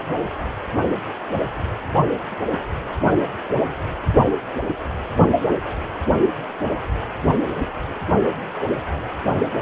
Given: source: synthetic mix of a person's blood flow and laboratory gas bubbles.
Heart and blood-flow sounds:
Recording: Doppler ultrasound of blood flow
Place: precordium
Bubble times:
no bubbles
From the record:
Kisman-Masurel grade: 000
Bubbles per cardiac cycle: 0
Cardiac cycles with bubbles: 0%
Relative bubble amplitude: no bubbles discernible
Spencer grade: 0 (complete lack of bubble signals)

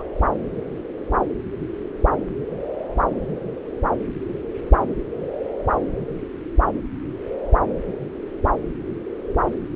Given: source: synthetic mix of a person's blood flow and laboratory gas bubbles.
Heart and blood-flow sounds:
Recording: Doppler ultrasound of blood flow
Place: subclavian vein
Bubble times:
0.00-0.03 s: bubbles
From the record:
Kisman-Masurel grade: 211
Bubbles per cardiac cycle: several, 3 to 8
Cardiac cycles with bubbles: 1 to 10%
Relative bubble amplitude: barely perceptible (0.100 to 0.250)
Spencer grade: 1 (occasional bubble signal discernible with the cardiac motion signal, with majority of cardiac periods free of bubbles)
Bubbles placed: anywhere in the cardiac cycle

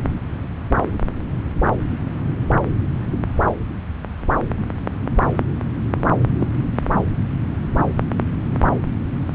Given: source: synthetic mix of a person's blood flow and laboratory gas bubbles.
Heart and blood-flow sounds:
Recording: Doppler ultrasound of blood flow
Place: subclavian vein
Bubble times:
6.39-6.47 s: bubbles
From the record:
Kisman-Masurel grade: 112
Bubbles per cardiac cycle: 1 to 2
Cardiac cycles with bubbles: 1 to 10%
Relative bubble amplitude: moderate (0.250 to 0.450)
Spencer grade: 1 (occasional bubble signal discernible with the cardiac motion signal, with majority of cardiac periods free of bubbles)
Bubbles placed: anywhere in the cardiac cycle

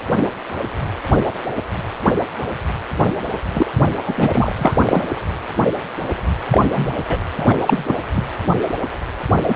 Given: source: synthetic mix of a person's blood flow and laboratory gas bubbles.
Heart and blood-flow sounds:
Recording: Doppler ultrasound of blood flow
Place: precordium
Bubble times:
3.53-3.71 s: bubbles
4.06-4.75 s: bubbles
4.85-5.12 s: bubbles
6.50-6.66 s: bubbles
6.68-6.93 s: bubbles
7.08-7.18 s: bubbles
7.38-7.55 s: bubbles
7.67-7.96 s: bubbles
8.16-8.21 s: bubbles
9.48-9.55 s: bubbles
From the record:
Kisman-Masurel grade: 223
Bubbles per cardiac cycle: several, 3 to 8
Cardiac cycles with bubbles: 10 to 50%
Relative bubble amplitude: loud (0.450 to 0.775)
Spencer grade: 2 (many but less than half of the cardiac periods contain bubble signals, singularly or in groups)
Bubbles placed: anywhere in the cardiac cycle

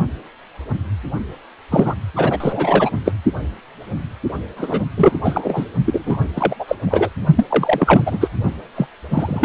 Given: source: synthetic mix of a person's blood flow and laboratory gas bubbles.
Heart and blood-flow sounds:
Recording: Doppler ultrasound of blood flow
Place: precordium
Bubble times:
1.71-1.95 s: bubbles
2.15-2.91 s: bubbles
3.05-3.12 s: bubbles
4.56-4.83 s: bubbles
4.96-5.17 s: bubbles
5.24-5.66 s: bubbles
5.85-6.29 s: bubbles
6.36-6.55 s: bubbles
6.59-6.65 s: bubbles
6.68-6.75 s: bubbles
6.87-7.09 s: bubbles
7.37-7.46 s: bubbles
7.49-8.02 s: bubbles
8.05-8.29 s: bubbles
8.76-8.87 s: bubbles
9.11-9.45 s: bubbles
From the record:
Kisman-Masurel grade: 333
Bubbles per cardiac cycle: rolling drumbeat, 9 or more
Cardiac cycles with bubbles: 50 to 99%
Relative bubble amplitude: loud (0.450 to 0.775)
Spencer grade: 3 (all of the cardiac periods contain showers or single bubble signals, but not dominating or overriding the cardiac motion signals)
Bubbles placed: only in the low amplitude regions of the cardiac cycle

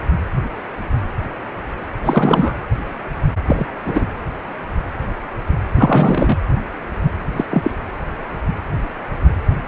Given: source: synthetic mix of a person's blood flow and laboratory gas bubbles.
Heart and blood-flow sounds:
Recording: Doppler ultrasound of blood flow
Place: precordium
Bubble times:
2.03-2.57 s: bubbles
3.46-3.67 s: bubbles
3.85-4.05 s: bubbles
5.75-6.38 s: bubbles
7.36-7.45 s: bubbles
7.51-7.71 s: bubbles
From the record:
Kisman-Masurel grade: 223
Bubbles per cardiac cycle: several, 3 to 8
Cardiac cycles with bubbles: 10 to 50%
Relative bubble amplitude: loud (0.450 to 0.775)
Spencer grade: 2 (many but less than half of the cardiac periods contain bubble signals, singularly or in groups)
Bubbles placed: anywhere in the cardiac cycle

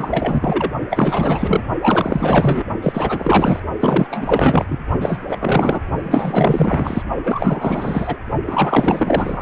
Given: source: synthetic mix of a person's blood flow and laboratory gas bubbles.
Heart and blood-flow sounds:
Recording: Doppler ultrasound of blood flow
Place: precordium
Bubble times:
0.00-0.71 s: bubbles
0.90-1.62 s: bubbles
1.81-2.64 s: bubbles
2.81-3.59 s: bubbles
3.79-4.79 s: bubbles
5.00-5.19 s: bubbles
5.29-5.80 s: bubbles
6.04-7.03 s: bubbles
7.24-8.17 s: bubbles
8.46-9.42 s: bubbles
From the record:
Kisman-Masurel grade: 444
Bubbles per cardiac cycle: continuous sound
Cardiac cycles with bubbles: 100%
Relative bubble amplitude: maximal (0.775 to 0.999)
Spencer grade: 4 (maximum detectable bubble signal sounding continuously throughout systole and diastole of every cardiac period, and overriding the amplitude of the normal cardiac signals)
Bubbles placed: only in the low amplitude regions of the cardiac cycle

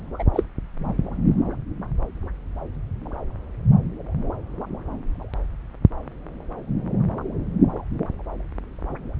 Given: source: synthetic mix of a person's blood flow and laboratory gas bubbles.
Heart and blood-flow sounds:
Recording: Doppler ultrasound of blood flow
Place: subclavian vein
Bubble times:
0.19-0.23 s: bubbles
0.33-0.43 s: bubbles
From the record:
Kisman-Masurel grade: 212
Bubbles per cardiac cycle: several, 3 to 8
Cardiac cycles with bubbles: 1 to 10%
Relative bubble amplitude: moderate (0.250 to 0.450)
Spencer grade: 1 (occasional bubble signal discernible with the cardiac motion signal, with majority of cardiac periods free of bubbles)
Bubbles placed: anywhere in the cardiac cycle

